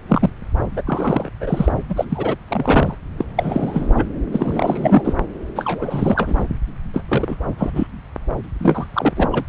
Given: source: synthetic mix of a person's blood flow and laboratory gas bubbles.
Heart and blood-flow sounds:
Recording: Doppler ultrasound of blood flow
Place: subclavian vein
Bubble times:
0.08-0.30 s: bubbles
0.76-0.82 s: bubbles
0.86-1.30 s: bubbles
1.40-1.72 s: bubbles
1.89-2.05 s: bubbles
2.09-2.36 s: bubbles
2.48-2.94 s: bubbles
3.17-3.25 s: bubbles
3.36-3.92 s: bubbles
3.95-4.06 s: bubbles
4.32-5.13 s: bubbles
5.55-6.45 s: bubbles
6.93-7.02 s: bubbles
7.08-7.36 s: bubbles
7.58-7.71 s: bubbles
7.75-7.87 s: bubbles
8.44-8.46 s: bubbles
8.59-8.87 s: bubbles
8.93-9.13 s: bubbles
9.16-9.45 s: bubbles
From the record:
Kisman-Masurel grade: 342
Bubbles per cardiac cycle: rolling drumbeat, 9 or more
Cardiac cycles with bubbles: 100%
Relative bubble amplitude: moderate (0.250 to 0.450)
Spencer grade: 3 (all of the cardiac periods contain showers or single bubble signals, but not dominating or overriding the cardiac motion signals)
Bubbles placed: anywhere in the cardiac cycle

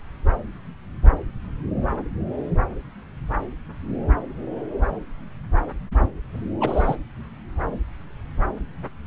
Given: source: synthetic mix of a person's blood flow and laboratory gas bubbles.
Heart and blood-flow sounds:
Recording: Doppler ultrasound of blood flow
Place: subclavian vein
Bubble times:
6.60-6.96 s: bubbles
From the record:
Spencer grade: 1 (occasional bubble signal discernible with the cardiac motion signal, with majority of cardiac periods free of bubbles)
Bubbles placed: anywhere in the cardiac cycle

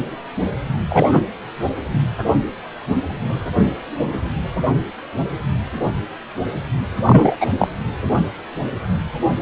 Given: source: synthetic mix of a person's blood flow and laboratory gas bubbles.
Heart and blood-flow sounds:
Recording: Doppler ultrasound of blood flow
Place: precordium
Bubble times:
0.89-1.23 s: bubbles
7.05-7.36 s: bubbles
7.40-7.46 s: bubbles
7.59-7.67 s: bubbles
From the record:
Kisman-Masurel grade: 213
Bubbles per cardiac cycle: several, 3 to 8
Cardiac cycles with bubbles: 1 to 10%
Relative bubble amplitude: loud (0.450 to 0.775)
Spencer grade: 1 (occasional bubble signal discernible with the cardiac motion signal, with majority of cardiac periods free of bubbles)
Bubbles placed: anywhere in the cardiac cycle

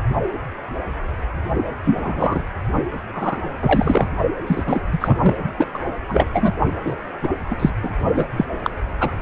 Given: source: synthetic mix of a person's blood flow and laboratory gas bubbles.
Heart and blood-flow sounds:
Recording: Doppler ultrasound of blood flow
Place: precordium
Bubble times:
1.84-2.43 s: bubbles
3.14-3.38 s: bubbles
3.61-4.07 s: bubbles
4.46-4.80 s: bubbles
4.92-5.17 s: bubbles
5.21-5.35 s: bubbles
5.57-5.65 s: bubbles
5.73-5.82 s: bubbles
6.08-6.25 s: bubbles
6.32-6.52 s: bubbles
6.84-6.96 s: bubbles
7.22-7.28 s: bubbles
7.50-7.57 s: bubbles
7.59-7.70 s: bubbles
7.83-7.90 s: bubbles
8.15-8.26 s: bubbles
8.37-8.45 s: bubbles
8.63-8.70 s: bubbles
9.00-9.11 s: bubbles
From the record:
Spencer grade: 3 (all of the cardiac periods contain showers or single bubble signals, but not dominating or overriding the cardiac motion signals)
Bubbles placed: only in the low amplitude regions of the cardiac cycle

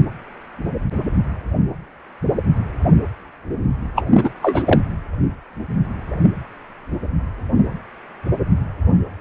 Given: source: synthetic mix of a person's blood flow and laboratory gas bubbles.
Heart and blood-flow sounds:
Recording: Doppler ultrasound of blood flow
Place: precordium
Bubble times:
3.96-4.04 s: bubbles
4.17-4.29 s: bubbles
4.42-4.63 s: bubbles
4.65-4.79 s: bubbles
From the record:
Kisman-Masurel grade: 213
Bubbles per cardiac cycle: several, 3 to 8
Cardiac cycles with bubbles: 1 to 10%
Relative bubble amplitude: loud (0.450 to 0.775)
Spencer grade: 1 (occasional bubble signal discernible with the cardiac motion signal, with majority of cardiac periods free of bubbles)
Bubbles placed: anywhere in the cardiac cycle

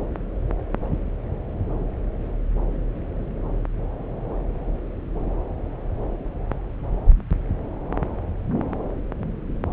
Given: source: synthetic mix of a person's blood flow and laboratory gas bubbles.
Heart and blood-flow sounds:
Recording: Doppler ultrasound of blood flow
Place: subclavian vein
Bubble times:
no bubbles
From the record:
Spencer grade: 0 (complete lack of bubble signals)

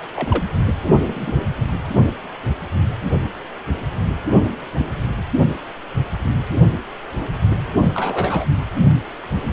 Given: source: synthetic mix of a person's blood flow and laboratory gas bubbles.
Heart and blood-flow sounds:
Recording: Doppler ultrasound of blood flow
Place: precordium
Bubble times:
0.15-0.43 s: bubbles
1.05-1.47 s: bubbles
4.77-5.08 s: bubbles
7.94-8.46 s: bubbles
From the record:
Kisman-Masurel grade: 122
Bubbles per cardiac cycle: 1 to 2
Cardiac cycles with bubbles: 10 to 50%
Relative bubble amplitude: moderate (0.250 to 0.450)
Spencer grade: 2 (many but less than half of the cardiac periods contain bubble signals, singularly or in groups)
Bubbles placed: only in the low amplitude regions of the cardiac cycle

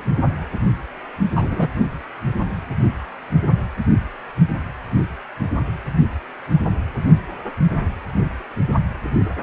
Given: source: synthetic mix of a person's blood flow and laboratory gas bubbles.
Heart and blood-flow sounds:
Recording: Doppler ultrasound of blood flow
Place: precordium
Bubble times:
1.35-1.69 s: bubbles
From the record:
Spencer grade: 1 (occasional bubble signal discernible with the cardiac motion signal, with majority of cardiac periods free of bubbles)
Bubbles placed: only in the low amplitude regions of the cardiac cycle

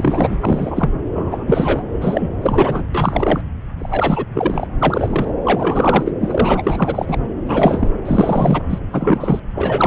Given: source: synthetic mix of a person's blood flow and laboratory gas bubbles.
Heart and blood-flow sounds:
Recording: Doppler ultrasound of blood flow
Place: subclavian vein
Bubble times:
0.00-0.38 s: bubbles
0.40-0.90 s: bubbles
1.15-1.83 s: bubbles
2.00-2.29 s: bubbles
2.42-2.87 s: bubbles
2.94-3.42 s: bubbles
3.79-4.25 s: bubbles
4.34-4.68 s: bubbles
4.80-5.33 s: bubbles
5.44-6.12 s: bubbles
6.21-7.18 s: bubbles
7.47-7.88 s: bubbles
8.05-8.62 s: bubbles
8.70-8.79 s: bubbles
8.93-9.40 s: bubbles
9.55-9.87 s: bubbles
From the record:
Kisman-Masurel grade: 343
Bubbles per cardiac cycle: rolling drumbeat, 9 or more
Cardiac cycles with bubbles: 100%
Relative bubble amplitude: loud (0.450 to 0.775)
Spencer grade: 3 (all of the cardiac periods contain showers or single bubble signals, but not dominating or overriding the cardiac motion signals)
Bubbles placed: anywhere in the cardiac cycle

